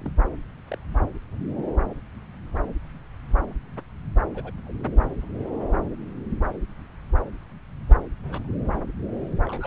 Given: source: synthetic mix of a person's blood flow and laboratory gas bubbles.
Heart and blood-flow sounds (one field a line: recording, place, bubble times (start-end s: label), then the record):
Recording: Doppler ultrasound of blood flow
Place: subclavian vein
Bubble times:
0.00-0.11 s: bubbles
0.71-0.75 s: bubbles
4.34-4.51 s: bubbles
4.66-4.72 s: bubbles
8.23-8.49 s: bubbles
9.45-9.67 s: bubbles
From the record:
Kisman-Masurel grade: 121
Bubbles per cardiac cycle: 1 to 2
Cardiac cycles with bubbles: 10 to 50%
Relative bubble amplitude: barely perceptible (0.100 to 0.250)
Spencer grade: 2 (many but less than half of the cardiac periods contain bubble signals, singularly or in groups)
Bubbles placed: anywhere in the cardiac cycle